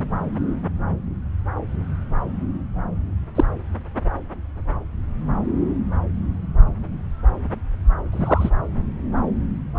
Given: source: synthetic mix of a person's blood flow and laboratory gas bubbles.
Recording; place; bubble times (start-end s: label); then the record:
Doppler ultrasound of blood flow; subclavian vein
3.35-3.44 s: bubbles
8.12-8.50 s: bubbles
From the record:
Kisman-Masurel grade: 123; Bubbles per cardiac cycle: 1 to 2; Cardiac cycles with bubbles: 10 to 50%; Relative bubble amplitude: loud (0.450 to 0.775); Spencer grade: 2 (many but less than half of the cardiac periods contain bubble signals, singularly or in groups); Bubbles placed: anywhere in the cardiac cycle